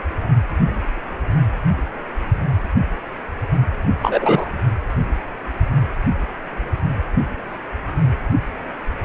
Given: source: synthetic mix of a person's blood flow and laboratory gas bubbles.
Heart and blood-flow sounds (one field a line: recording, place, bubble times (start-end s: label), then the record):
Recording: Doppler ultrasound of blood flow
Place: precordium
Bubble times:
4.02-4.49 s: bubbles
From the record:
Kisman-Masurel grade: 113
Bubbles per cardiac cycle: 1 to 2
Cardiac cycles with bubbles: 1 to 10%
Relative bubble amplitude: loud (0.450 to 0.775)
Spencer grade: 1 (occasional bubble signal discernible with the cardiac motion signal, with majority of cardiac periods free of bubbles)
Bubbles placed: anywhere in the cardiac cycle